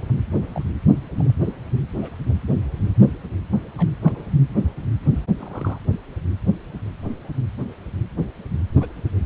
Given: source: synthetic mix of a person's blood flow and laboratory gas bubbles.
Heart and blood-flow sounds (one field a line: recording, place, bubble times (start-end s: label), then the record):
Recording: Doppler ultrasound of blood flow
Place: precordium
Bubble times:
0.53-0.62 s: bubbles
0.94-1.04 s: bubbles
1.12-1.34 s: bubbles
2.01-2.15 s: bubbles
3.77-3.86 s: bubbles
4.04-4.26 s: bubbles
5.37-5.79 s: bubbles
8.80-8.92 s: bubbles
From the record:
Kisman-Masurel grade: 121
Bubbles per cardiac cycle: 1 to 2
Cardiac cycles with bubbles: 10 to 50%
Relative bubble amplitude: barely perceptible (0.100 to 0.250)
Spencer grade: 2 (many but less than half of the cardiac periods contain bubble signals, singularly or in groups)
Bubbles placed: anywhere in the cardiac cycle